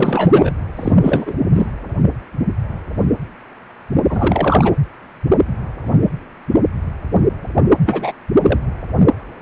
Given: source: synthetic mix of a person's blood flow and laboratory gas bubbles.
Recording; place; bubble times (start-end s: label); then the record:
Doppler ultrasound of blood flow; precordium
0.00-0.51 s: bubbles
0.76-0.99 s: bubbles
1.03-1.34 s: bubbles
1.53-1.67 s: bubbles
4.09-4.72 s: bubbles
7.85-8.12 s: bubbles
8.42-8.59 s: bubbles
From the record:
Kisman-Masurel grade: 223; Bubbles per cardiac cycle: several, 3 to 8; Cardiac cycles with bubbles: 10 to 50%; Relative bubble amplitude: loud (0.450 to 0.775); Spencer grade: 2 (many but less than half of the cardiac periods contain bubble signals, singularly or in groups); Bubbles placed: anywhere in the cardiac cycle